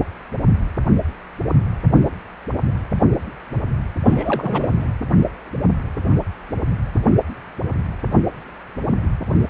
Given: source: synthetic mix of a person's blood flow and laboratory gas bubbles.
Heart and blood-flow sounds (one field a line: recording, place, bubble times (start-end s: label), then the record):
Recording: Doppler ultrasound of blood flow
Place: precordium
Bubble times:
4.05-4.73 s: bubbles
4.80-4.86 s: bubbles
From the record:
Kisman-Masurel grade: 212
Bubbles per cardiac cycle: several, 3 to 8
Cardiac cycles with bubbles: 1 to 10%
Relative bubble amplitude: moderate (0.250 to 0.450)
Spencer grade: 1 (occasional bubble signal discernible with the cardiac motion signal, with majority of cardiac periods free of bubbles)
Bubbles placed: anywhere in the cardiac cycle